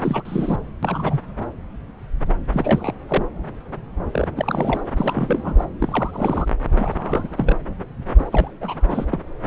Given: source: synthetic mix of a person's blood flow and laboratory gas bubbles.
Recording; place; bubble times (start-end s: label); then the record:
Doppler ultrasound of blood flow; subclavian vein
0.01-0.23 s: bubbles
0.25-0.59 s: bubbles
0.83-1.20 s: bubbles
2.52-2.94 s: bubbles
3.08-3.23 s: bubbles
4.12-4.28 s: bubbles
4.36-4.81 s: bubbles
4.97-5.65 s: bubbles
5.79-6.46 s: bubbles
6.76-7.58 s: bubbles
8.18-8.53 s: bubbles
8.61-9.05 s: bubbles
9.11-9.21 s: bubbles
From the record:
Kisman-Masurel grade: 332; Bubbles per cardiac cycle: rolling drumbeat, 9 or more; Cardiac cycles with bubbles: 50 to 99%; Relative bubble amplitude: moderate (0.250 to 0.450); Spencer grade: 3 (all of the cardiac periods contain showers or single bubble signals, but not dominating or overriding the cardiac motion signals); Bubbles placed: anywhere in the cardiac cycle